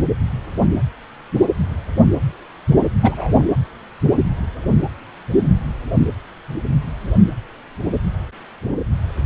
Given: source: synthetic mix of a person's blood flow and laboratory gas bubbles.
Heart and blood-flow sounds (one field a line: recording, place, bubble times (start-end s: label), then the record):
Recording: Doppler ultrasound of blood flow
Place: precordium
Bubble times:
3.00-3.49 s: bubbles
From the record:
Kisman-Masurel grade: 212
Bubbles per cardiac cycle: several, 3 to 8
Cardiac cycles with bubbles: 1 to 10%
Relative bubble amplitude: moderate (0.250 to 0.450)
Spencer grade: 1 (occasional bubble signal discernible with the cardiac motion signal, with majority of cardiac periods free of bubbles)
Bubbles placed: anywhere in the cardiac cycle